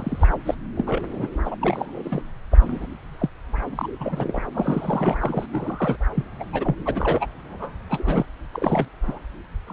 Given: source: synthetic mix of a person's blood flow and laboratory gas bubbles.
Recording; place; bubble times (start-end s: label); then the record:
Doppler ultrasound of blood flow; subclavian vein
0.00-0.27 s: bubbles
0.46-0.54 s: bubbles
0.75-1.02 s: bubbles
1.11-1.27 s: bubbles
1.45-1.56 s: bubbles
1.61-2.22 s: bubbles
2.51-2.58 s: bubbles
2.61-2.87 s: bubbles
3.19-3.30 s: bubbles
3.58-3.62 s: bubbles
3.75-3.88 s: bubbles
4.00-4.42 s: bubbles
4.54-5.46 s: bubbles
5.52-5.97 s: bubbles
6.14-6.25 s: bubbles
6.39-6.44 s: bubbles
6.52-6.76 s: bubbles
6.85-7.26 s: bubbles
7.44-7.74 s: bubbles
7.89-8.25 s: bubbles
8.53-8.88 s: bubbles
9.07-9.19 s: bubbles
9.66-9.73 s: bubbles
From the record:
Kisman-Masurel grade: 242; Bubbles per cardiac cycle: several, 3 to 8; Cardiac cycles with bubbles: 100%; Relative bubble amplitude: moderate (0.250 to 0.450); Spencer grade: 3 (all of the cardiac periods contain showers or single bubble signals, but not dominating or overriding the cardiac motion signals); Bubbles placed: anywhere in the cardiac cycle